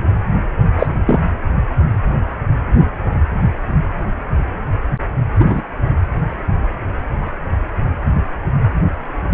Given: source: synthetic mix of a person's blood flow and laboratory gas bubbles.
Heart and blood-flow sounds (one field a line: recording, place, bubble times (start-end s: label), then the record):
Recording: Doppler ultrasound of blood flow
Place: precordium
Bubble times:
0.78-0.86 s: bubbles
1.06-1.20 s: bubbles
5.40-5.62 s: bubbles
From the record:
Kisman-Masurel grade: 123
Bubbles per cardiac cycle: 1 to 2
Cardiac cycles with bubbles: 10 to 50%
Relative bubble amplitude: loud (0.450 to 0.775)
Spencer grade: 2 (many but less than half of the cardiac periods contain bubble signals, singularly or in groups)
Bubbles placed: anywhere in the cardiac cycle